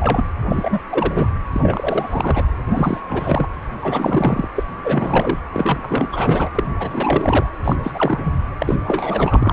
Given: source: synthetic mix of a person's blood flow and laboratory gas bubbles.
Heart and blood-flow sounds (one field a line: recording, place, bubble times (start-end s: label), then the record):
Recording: Doppler ultrasound of blood flow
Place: precordium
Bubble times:
0.00-0.23 s: bubbles
0.49-0.78 s: bubbles
0.90-1.30 s: bubbles
1.52-2.48 s: bubbles
2.67-3.01 s: bubbles
3.08-3.47 s: bubbles
3.81-4.48 s: bubbles
4.55-4.63 s: bubbles
4.84-5.41 s: bubbles
5.52-6.07 s: bubbles
6.12-6.49 s: bubbles
6.55-6.63 s: bubbles
6.79-7.46 s: bubbles
7.64-7.75 s: bubbles
7.83-8.33 s: bubbles
8.58-8.76 s: bubbles
8.85-9.53 s: bubbles
From the record:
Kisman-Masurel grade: 342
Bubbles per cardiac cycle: rolling drumbeat, 9 or more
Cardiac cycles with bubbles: 100%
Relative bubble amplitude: moderate (0.250 to 0.450)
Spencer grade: 3 (all of the cardiac periods contain showers or single bubble signals, but not dominating or overriding the cardiac motion signals)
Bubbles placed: anywhere in the cardiac cycle